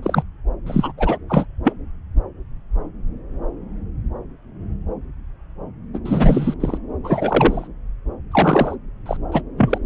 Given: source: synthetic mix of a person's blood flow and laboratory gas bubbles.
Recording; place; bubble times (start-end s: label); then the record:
Doppler ultrasound of blood flow; subclavian vein
0.03-0.23 s: bubbles
0.66-0.92 s: bubbles
0.97-1.18 s: bubbles
1.29-1.46 s: bubbles
1.64-1.73 s: bubbles
5.93-5.99 s: bubbles
6.05-6.54 s: bubbles
6.60-6.78 s: bubbles
7.04-7.67 s: bubbles
8.31-8.76 s: bubbles
9.06-9.17 s: bubbles
9.32-9.42 s: bubbles
9.57-9.78 s: bubbles
From the record:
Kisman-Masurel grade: 223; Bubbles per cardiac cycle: several, 3 to 8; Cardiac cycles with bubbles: 10 to 50%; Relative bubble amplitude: loud (0.450 to 0.775); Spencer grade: 2 (many but less than half of the cardiac periods contain bubble signals, singularly or in groups); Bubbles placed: anywhere in the cardiac cycle